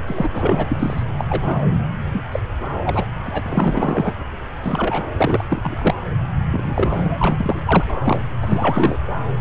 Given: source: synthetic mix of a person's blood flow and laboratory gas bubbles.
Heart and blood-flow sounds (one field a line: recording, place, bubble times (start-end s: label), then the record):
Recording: Doppler ultrasound of blood flow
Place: subclavian vein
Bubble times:
0.07-0.30 s: bubbles
0.35-1.03 s: bubbles
1.18-1.24 s: bubbles
1.28-1.65 s: bubbles
2.13-2.21 s: bubbles
2.31-2.40 s: bubbles
2.85-3.05 s: bubbles
3.23-4.14 s: bubbles
4.63-5.08 s: bubbles
5.17-5.45 s: bubbles
5.49-5.95 s: bubbles
6.52-7.03 s: bubbles
7.06-7.62 s: bubbles
7.66-7.83 s: bubbles
7.87-8.00 s: bubbles
8.04-8.22 s: bubbles
8.42-8.97 s: bubbles
From the record:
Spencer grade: 3 (all of the cardiac periods contain showers or single bubble signals, but not dominating or overriding the cardiac motion signals)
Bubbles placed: anywhere in the cardiac cycle